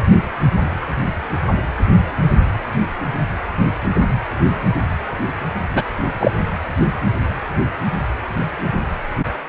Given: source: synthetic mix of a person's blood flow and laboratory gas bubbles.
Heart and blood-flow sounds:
Doppler ultrasound of blood flow; precordium
5.75-5.83 s: bubbles
6.20-6.32 s: bubbles
From the record:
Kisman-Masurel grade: 123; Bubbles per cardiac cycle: 1 to 2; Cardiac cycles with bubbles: 10 to 50%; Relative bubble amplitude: loud (0.450 to 0.775); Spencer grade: 2 (many but less than half of the cardiac periods contain bubble signals, singularly or in groups); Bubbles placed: anywhere in the cardiac cycle

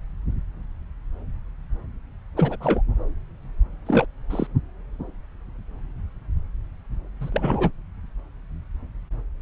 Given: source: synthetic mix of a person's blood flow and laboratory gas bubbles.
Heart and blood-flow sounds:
Doppler ultrasound of blood flow; subclavian vein
2.37-2.56 s: bubbles
2.60-2.81 s: bubbles
3.86-4.05 s: bubbles
4.30-4.47 s: bubbles
7.21-7.71 s: bubbles
From the record:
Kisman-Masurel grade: 222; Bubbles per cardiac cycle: several, 3 to 8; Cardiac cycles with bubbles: 10 to 50%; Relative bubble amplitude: moderate (0.250 to 0.450); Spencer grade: 2 (many but less than half of the cardiac periods contain bubble signals, singularly or in groups); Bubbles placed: anywhere in the cardiac cycle

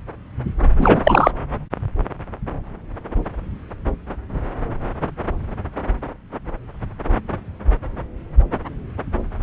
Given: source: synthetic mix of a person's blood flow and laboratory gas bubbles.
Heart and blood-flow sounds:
Doppler ultrasound of blood flow; subclavian vein
0.78-1.01 s: bubbles
1.03-1.31 s: bubbles
From the record:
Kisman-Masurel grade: 213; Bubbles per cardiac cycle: several, 3 to 8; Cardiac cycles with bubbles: 1 to 10%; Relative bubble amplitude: loud (0.450 to 0.775); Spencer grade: 1 (occasional bubble signal discernible with the cardiac motion signal, with majority of cardiac periods free of bubbles); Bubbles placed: anywhere in the cardiac cycle

